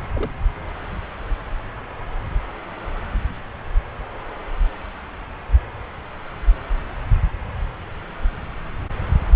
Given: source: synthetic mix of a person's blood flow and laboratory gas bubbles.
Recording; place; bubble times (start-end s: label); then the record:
Doppler ultrasound of blood flow; subclavian vein
0.14-0.32 s: bubbles
From the record:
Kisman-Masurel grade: 211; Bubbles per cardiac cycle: several, 3 to 8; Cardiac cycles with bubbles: 1 to 10%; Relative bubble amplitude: barely perceptible (0.100 to 0.250); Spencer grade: 1 (occasional bubble signal discernible with the cardiac motion signal, with majority of cardiac periods free of bubbles); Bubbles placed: anywhere in the cardiac cycle